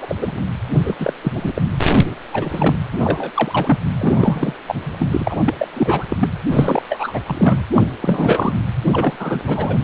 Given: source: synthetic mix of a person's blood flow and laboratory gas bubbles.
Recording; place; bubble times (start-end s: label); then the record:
Doppler ultrasound of blood flow; precordium
0.00-0.41 s: bubbles
0.74-0.95 s: bubbles
0.99-1.13 s: bubbles
1.22-1.62 s: bubbles
2.33-2.76 s: bubbles
2.92-2.98 s: bubbles
3.00-3.31 s: bubbles
3.34-3.78 s: bubbles
3.99-4.53 s: bubbles
4.67-4.75 s: bubbles
4.83-5.37 s: bubbles
5.45-5.54 s: bubbles
5.58-5.67 s: bubbles
5.74-6.04 s: bubbles
6.10-6.17 s: bubbles
6.19-6.29 s: bubbles
6.52-6.83 s: bubbles
6.89-7.20 s: bubbles
7.26-7.63 s: bubbles
7.75-7.88 s: bubbles
8.01-8.53 s: bubbles
8.86-9.43 s: bubbles
9.46-9.78 s: bubbles
From the record:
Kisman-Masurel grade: 333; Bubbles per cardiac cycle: rolling drumbeat, 9 or more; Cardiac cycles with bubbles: 50 to 99%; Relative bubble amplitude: loud (0.450 to 0.775); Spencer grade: 3 (all of the cardiac periods contain showers or single bubble signals, but not dominating or overriding the cardiac motion signals); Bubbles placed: anywhere in the cardiac cycle